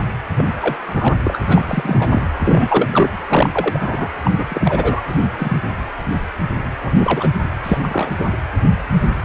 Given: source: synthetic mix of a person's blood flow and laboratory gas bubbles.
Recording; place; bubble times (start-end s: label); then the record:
Doppler ultrasound of blood flow; precordium
0.38-0.44 s: bubbles
0.61-0.78 s: bubbles
0.85-1.19 s: bubbles
1.25-1.37 s: bubbles
1.48-2.21 s: bubbles
2.45-3.10 s: bubbles
3.29-4.08 s: bubbles
4.24-4.31 s: bubbles
4.38-4.46 s: bubbles
4.50-5.02 s: bubbles
5.08-5.21 s: bubbles
5.38-5.61 s: bubbles
6.82-7.30 s: bubbles
7.63-7.79 s: bubbles
7.83-8.11 s: bubbles
8.18-8.27 s: bubbles
From the record:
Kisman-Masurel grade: 233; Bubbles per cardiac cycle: several, 3 to 8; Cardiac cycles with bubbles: 50 to 99%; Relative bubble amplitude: loud (0.450 to 0.775); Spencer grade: 3 (all of the cardiac periods contain showers or single bubble signals, but not dominating or overriding the cardiac motion signals); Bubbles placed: anywhere in the cardiac cycle